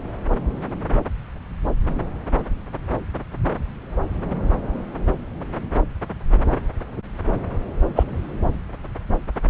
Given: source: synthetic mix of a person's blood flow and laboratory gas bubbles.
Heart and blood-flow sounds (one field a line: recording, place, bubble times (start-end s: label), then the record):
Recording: Doppler ultrasound of blood flow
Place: subclavian vein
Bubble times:
7.96-8.03 s: bubbles
From the record:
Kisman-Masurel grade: 113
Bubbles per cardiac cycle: 1 to 2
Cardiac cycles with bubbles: 1 to 10%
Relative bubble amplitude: loud (0.450 to 0.775)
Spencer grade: 1 (occasional bubble signal discernible with the cardiac motion signal, with majority of cardiac periods free of bubbles)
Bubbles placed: anywhere in the cardiac cycle